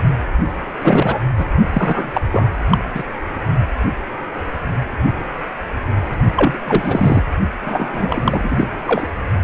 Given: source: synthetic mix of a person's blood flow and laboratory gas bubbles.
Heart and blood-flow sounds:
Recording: Doppler ultrasound of blood flow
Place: precordium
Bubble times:
0.82-1.20 s: bubbles
1.38-1.46 s: bubbles
1.73-2.21 s: bubbles
2.31-2.47 s: bubbles
2.69-2.78 s: bubbles
2.94-3.03 s: bubbles
6.37-6.58 s: bubbles
6.65-7.22 s: bubbles
7.64-8.69 s: bubbles
8.85-9.07 s: bubbles
From the record:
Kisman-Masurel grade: 333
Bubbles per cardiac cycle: rolling drumbeat, 9 or more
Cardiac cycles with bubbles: 50 to 99%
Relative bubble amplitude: loud (0.450 to 0.775)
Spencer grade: 3 (all of the cardiac periods contain showers or single bubble signals, but not dominating or overriding the cardiac motion signals)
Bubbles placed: only in the low amplitude regions of the cardiac cycle

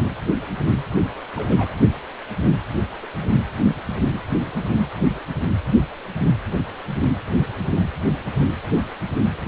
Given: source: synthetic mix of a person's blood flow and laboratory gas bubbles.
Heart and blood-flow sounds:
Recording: Doppler ultrasound of blood flow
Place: precordium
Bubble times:
1.35-1.75 s: bubbles
3.02-3.06 s: bubbles
From the record:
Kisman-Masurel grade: 121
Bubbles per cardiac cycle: 1 to 2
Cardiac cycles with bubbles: 10 to 50%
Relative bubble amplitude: barely perceptible (0.100 to 0.250)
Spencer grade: 2 (many but less than half of the cardiac periods contain bubble signals, singularly or in groups)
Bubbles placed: anywhere in the cardiac cycle

